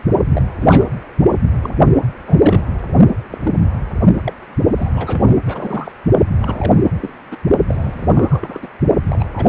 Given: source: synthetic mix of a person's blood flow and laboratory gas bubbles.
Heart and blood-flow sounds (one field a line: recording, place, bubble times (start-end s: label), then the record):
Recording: Doppler ultrasound of blood flow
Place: precordium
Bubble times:
0.29-0.42 s: bubbles
0.61-0.87 s: bubbles
1.63-1.74 s: bubbles
2.27-2.62 s: bubbles
3.31-3.38 s: bubbles
3.43-3.52 s: bubbles
4.24-4.33 s: bubbles
4.77-4.89 s: bubbles
4.92-5.38 s: bubbles
5.46-5.92 s: bubbles
6.42-6.80 s: bubbles
7.01-7.12 s: bubbles
7.31-7.37 s: bubbles
7.67-8.07 s: bubbles
8.14-8.69 s: bubbles
9.05-9.28 s: bubbles
9.33-9.48 s: bubbles
From the record:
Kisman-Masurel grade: 242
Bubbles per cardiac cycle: several, 3 to 8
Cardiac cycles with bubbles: 100%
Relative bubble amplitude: moderate (0.250 to 0.450)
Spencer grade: 3 (all of the cardiac periods contain showers or single bubble signals, but not dominating or overriding the cardiac motion signals)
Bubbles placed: only in the low amplitude regions of the cardiac cycle